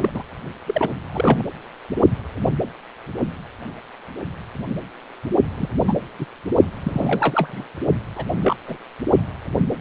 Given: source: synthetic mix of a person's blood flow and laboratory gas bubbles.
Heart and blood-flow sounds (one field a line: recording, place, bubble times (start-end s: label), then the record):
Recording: Doppler ultrasound of blood flow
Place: precordium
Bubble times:
0.00-0.10 s: bubbles
0.14-0.23 s: bubbles
0.67-0.91 s: bubbles
1.06-1.45 s: bubbles
5.57-5.69 s: bubbles
5.87-5.93 s: bubbles
6.18-6.25 s: bubbles
6.83-7.67 s: bubbles
8.16-8.24 s: bubbles
8.45-8.56 s: bubbles
8.68-8.77 s: bubbles
From the record:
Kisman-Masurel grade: 222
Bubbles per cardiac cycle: several, 3 to 8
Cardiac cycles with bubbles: 10 to 50%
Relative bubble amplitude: moderate (0.250 to 0.450)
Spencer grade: 2 (many but less than half of the cardiac periods contain bubble signals, singularly or in groups)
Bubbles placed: only in the low amplitude regions of the cardiac cycle